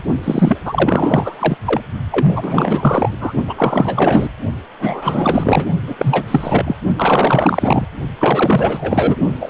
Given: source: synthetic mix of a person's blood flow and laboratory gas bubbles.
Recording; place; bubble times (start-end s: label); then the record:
Doppler ultrasound of blood flow; precordium
0.23-0.58 s: bubbles
0.65-1.57 s: bubbles
1.65-1.82 s: bubbles
2.11-3.15 s: bubbles
3.19-3.33 s: bubbles
3.47-4.29 s: bubbles
4.79-5.67 s: bubbles
5.87-5.96 s: bubbles
5.98-6.75 s: bubbles
6.96-7.86 s: bubbles
8.18-9.16 s: bubbles
9.40-9.50 s: bubbles
From the record:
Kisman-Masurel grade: 444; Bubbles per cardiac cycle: continuous sound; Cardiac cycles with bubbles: 100%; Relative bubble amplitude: maximal (0.775 to 0.999); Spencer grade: 4 (maximum detectable bubble signal sounding continuously throughout systole and diastole of every cardiac period, and overriding the amplitude of the normal cardiac signals); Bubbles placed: only in the low amplitude regions of the cardiac cycle